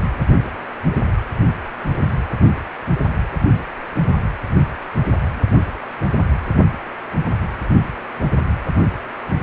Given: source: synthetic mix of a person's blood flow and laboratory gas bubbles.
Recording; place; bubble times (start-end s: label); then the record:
Doppler ultrasound of blood flow; precordium
9.41-9.43 s: bubbles
From the record:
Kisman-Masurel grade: 112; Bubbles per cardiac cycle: 1 to 2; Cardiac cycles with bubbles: 1 to 10%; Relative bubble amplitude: moderate (0.250 to 0.450); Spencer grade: 1 (occasional bubble signal discernible with the cardiac motion signal, with majority of cardiac periods free of bubbles); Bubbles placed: anywhere in the cardiac cycle